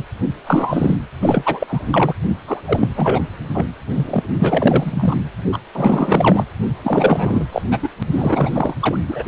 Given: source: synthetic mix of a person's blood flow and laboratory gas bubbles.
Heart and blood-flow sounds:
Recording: Doppler ultrasound of blood flow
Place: precordium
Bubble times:
0.00-0.03 s: bubbles
0.46-0.97 s: bubbles
1.22-2.13 s: bubbles
2.47-2.61 s: bubbles
2.66-2.90 s: bubbles
2.96-3.23 s: bubbles
3.53-3.67 s: bubbles
3.95-4.22 s: bubbles
4.39-5.16 s: bubbles
5.52-5.59 s: bubbles
5.75-6.44 s: bubbles
6.84-7.45 s: bubbles
7.52-7.62 s: bubbles
7.71-7.79 s: bubbles
7.83-7.89 s: bubbles
7.99-8.03 s: bubbles
8.12-8.75 s: bubbles
8.79-8.97 s: bubbles
9.08-9.23 s: bubbles
From the record:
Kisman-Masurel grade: 343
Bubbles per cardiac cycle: rolling drumbeat, 9 or more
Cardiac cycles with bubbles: 100%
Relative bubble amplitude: loud (0.450 to 0.775)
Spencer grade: 3 (all of the cardiac periods contain showers or single bubble signals, but not dominating or overriding the cardiac motion signals)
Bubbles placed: anywhere in the cardiac cycle

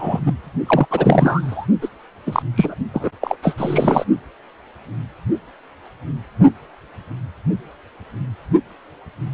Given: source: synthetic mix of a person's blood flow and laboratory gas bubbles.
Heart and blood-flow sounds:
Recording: Doppler ultrasound of blood flow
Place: precordium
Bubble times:
0.00-0.20 s: bubbles
0.26-0.32 s: bubbles
0.67-0.86 s: bubbles
0.91-1.67 s: bubbles
1.81-1.89 s: bubbles
2.27-2.42 s: bubbles
2.56-2.75 s: bubbles
2.94-3.10 s: bubbles
3.21-3.36 s: bubbles
3.42-4.04 s: bubbles
From the record:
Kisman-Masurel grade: 233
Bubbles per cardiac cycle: several, 3 to 8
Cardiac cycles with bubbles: 50 to 99%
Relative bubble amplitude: loud (0.450 to 0.775)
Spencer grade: 3 (all of the cardiac periods contain showers or single bubble signals, but not dominating or overriding the cardiac motion signals)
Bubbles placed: only in the low amplitude regions of the cardiac cycle

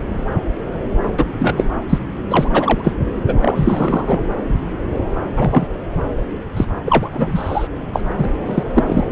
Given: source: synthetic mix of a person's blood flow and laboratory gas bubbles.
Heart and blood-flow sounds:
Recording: Doppler ultrasound of blood flow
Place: subclavian vein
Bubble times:
1.17-1.25 s: bubbles
1.39-1.70 s: bubbles
1.89-1.99 s: bubbles
2.29-2.48 s: bubbles
2.53-2.93 s: bubbles
3.25-4.20 s: bubbles
5.36-5.67 s: bubbles
6.57-6.65 s: bubbles
6.86-7.68 s: bubbles
7.93-8.01 s: bubbles
8.17-8.29 s: bubbles
8.46-8.63 s: bubbles
8.73-9.04 s: bubbles
From the record:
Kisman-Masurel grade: 233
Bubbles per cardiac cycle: several, 3 to 8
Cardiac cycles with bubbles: 50 to 99%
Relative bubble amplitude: loud (0.450 to 0.775)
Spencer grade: 3 (all of the cardiac periods contain showers or single bubble signals, but not dominating or overriding the cardiac motion signals)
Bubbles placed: anywhere in the cardiac cycle

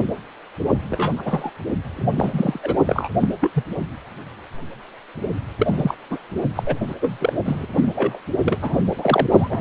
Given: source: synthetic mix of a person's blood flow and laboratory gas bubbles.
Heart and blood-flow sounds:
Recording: Doppler ultrasound of blood flow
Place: precordium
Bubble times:
0.90-1.51 s: bubbles
1.96-2.59 s: bubbles
2.62-2.77 s: bubbles
2.87-3.08 s: bubbles
3.19-3.29 s: bubbles
3.40-3.64 s: bubbles
5.58-5.95 s: bubbles
6.10-6.18 s: bubbles
6.55-6.80 s: bubbles
6.88-6.95 s: bubbles
7.01-7.33 s: bubbles
7.45-7.66 s: bubbles
7.75-7.85 s: bubbles
7.95-8.19 s: bubbles
8.45-8.78 s: bubbles
8.98-9.27 s: bubbles
9.30-9.61 s: bubbles
From the record:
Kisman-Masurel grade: 232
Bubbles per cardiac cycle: several, 3 to 8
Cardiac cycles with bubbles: 50 to 99%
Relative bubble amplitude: moderate (0.250 to 0.450)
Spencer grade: 3 (all of the cardiac periods contain showers or single bubble signals, but not dominating or overriding the cardiac motion signals)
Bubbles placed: only in the low amplitude regions of the cardiac cycle

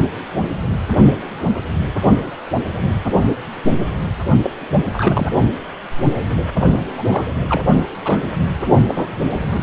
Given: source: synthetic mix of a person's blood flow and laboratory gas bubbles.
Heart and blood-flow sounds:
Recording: Doppler ultrasound of blood flow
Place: precordium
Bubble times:
4.42-4.50 s: bubbles
4.93-5.30 s: bubbles
6.97-7.03 s: bubbles
7.09-7.24 s: bubbles
7.49-7.75 s: bubbles
8.05-8.23 s: bubbles
8.88-9.07 s: bubbles
9.31-9.38 s: bubbles
9.44-9.63 s: bubbles
From the record:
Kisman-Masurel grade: 222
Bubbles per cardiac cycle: several, 3 to 8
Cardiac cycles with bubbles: 10 to 50%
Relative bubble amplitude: moderate (0.250 to 0.450)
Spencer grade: 2 (many but less than half of the cardiac periods contain bubble signals, singularly or in groups)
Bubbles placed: only in the low amplitude regions of the cardiac cycle

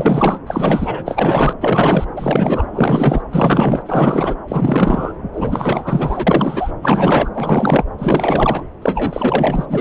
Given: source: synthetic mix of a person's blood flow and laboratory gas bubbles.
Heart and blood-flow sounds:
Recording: Doppler ultrasound of blood flow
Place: subclavian vein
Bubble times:
0.00-0.40 s: bubbles
0.46-1.54 s: bubbles
1.60-2.04 s: bubbles
2.16-2.68 s: bubbles
2.73-3.22 s: bubbles
3.31-3.83 s: bubbles
3.86-4.35 s: bubbles
4.48-5.12 s: bubbles
5.33-6.71 s: bubbles
6.81-7.30 s: bubbles
7.33-7.84 s: bubbles
7.98-8.62 s: bubbles
8.81-9.65 s: bubbles
9.69-9.81 s: bubbles
From the record:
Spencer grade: 4 (maximum detectable bubble signal sounding continuously throughout systole and diastole of every cardiac period, and overriding the amplitude of the normal cardiac signals)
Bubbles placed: anywhere in the cardiac cycle

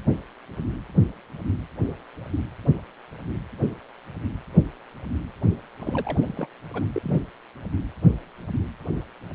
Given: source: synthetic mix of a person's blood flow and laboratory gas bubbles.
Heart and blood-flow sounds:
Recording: Doppler ultrasound of blood flow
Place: precordium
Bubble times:
5.80-6.18 s: bubbles
6.22-6.47 s: bubbles
6.74-6.86 s: bubbles
6.94-7.22 s: bubbles
From the record:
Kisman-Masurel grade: 211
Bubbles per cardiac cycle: several, 3 to 8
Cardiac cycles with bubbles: 1 to 10%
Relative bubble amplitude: barely perceptible (0.100 to 0.250)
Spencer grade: 1 (occasional bubble signal discernible with the cardiac motion signal, with majority of cardiac periods free of bubbles)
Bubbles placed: anywhere in the cardiac cycle

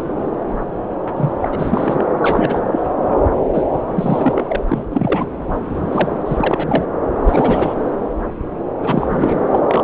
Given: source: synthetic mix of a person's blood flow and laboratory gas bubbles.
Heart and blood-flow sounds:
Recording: Doppler ultrasound of blood flow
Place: subclavian vein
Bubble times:
1.16-1.32 s: bubbles
1.42-2.04 s: bubbles
2.22-2.61 s: bubbles
2.71-2.80 s: bubbles
3.01-3.21 s: bubbles
3.53-3.65 s: bubbles
3.94-4.56 s: bubbles
4.68-4.85 s: bubbles
4.91-5.29 s: bubbles
5.91-6.23 s: bubbles
6.26-6.86 s: bubbles
7.28-7.75 s: bubbles
8.82-9.08 s: bubbles
9.11-9.41 s: bubbles
9.50-9.60 s: bubbles
9.68-9.84 s: bubbles
From the record:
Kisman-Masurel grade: 333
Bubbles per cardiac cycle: rolling drumbeat, 9 or more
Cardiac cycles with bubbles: 50 to 99%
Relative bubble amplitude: loud (0.450 to 0.775)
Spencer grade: 3 (all of the cardiac periods contain showers or single bubble signals, but not dominating or overriding the cardiac motion signals)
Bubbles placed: anywhere in the cardiac cycle

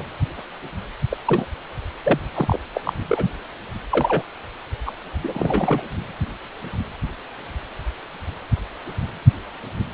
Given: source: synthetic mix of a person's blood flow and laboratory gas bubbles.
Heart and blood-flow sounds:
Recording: Doppler ultrasound of blood flow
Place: precordium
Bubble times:
0.00-0.04 s: bubbles
1.10-1.17 s: bubbles
1.26-1.46 s: bubbles
2.04-2.20 s: bubbles
2.34-2.60 s: bubbles
2.74-2.81 s: bubbles
2.85-2.93 s: bubbles
3.09-3.26 s: bubbles
3.92-4.22 s: bubbles
4.85-4.93 s: bubbles
5.23-5.82 s: bubbles
From the record:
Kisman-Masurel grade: 232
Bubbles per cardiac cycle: several, 3 to 8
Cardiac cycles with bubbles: 50 to 99%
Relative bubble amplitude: moderate (0.250 to 0.450)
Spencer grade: 3 (all of the cardiac periods contain showers or single bubble signals, but not dominating or overriding the cardiac motion signals)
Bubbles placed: anywhere in the cardiac cycle

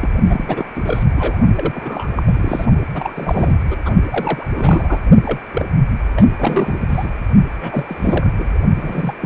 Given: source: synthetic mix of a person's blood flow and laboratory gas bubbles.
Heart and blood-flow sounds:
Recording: Doppler ultrasound of blood flow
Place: precordium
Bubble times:
0.00-0.10 s: bubbles
0.29-0.65 s: bubbles
0.75-0.82 s: bubbles
0.85-1.03 s: bubbles
1.16-1.38 s: bubbles
1.55-2.09 s: bubbles
2.16-2.23 s: bubbles
2.27-2.66 s: bubbles
2.94-3.56 s: bubbles
3.70-3.77 s: bubbles
3.85-3.91 s: bubbles
4.05-4.44 s: bubbles
4.56-5.01 s: bubbles
5.25-5.41 s: bubbles
5.52-5.66 s: bubbles
6.16-6.25 s: bubbles
6.32-7.09 s: bubbles
7.61-8.59 s: bubbles
8.76-9.14 s: bubbles
9.21-9.26 s: bubbles
From the record:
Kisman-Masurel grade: 342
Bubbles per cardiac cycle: rolling drumbeat, 9 or more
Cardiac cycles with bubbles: 100%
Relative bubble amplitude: moderate (0.250 to 0.450)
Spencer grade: 3 (all of the cardiac periods contain showers or single bubble signals, but not dominating or overriding the cardiac motion signals)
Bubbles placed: only in the low amplitude regions of the cardiac cycle

